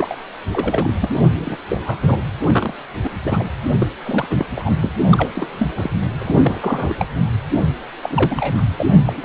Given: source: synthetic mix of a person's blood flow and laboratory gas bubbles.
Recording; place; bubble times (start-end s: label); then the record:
Doppler ultrasound of blood flow; precordium
0.00-0.15 s: bubbles
0.53-0.92 s: bubbles
1.01-1.09 s: bubbles
1.38-1.56 s: bubbles
1.69-2.17 s: bubbles
2.46-2.74 s: bubbles
3.04-3.09 s: bubbles
3.25-3.46 s: bubbles
3.71-3.87 s: bubbles
4.07-4.27 s: bubbles
4.30-4.46 s: bubbles
4.55-4.73 s: bubbles
4.81-4.90 s: bubbles
5.12-5.29 s: bubbles
5.35-5.69 s: bubbles
5.76-5.90 s: bubbles
6.19-6.95 s: bubbles
7.00-7.08 s: bubbles
7.53-7.66 s: bubbles
8.02-8.62 s: bubbles
8.77-8.96 s: bubbles
9.05-9.13 s: bubbles
9.17-9.25 s: bubbles
From the record:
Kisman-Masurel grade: 242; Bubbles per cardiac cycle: several, 3 to 8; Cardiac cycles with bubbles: 100%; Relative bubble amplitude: moderate (0.250 to 0.450); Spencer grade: 3 (all of the cardiac periods contain showers or single bubble signals, but not dominating or overriding the cardiac motion signals); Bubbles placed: anywhere in the cardiac cycle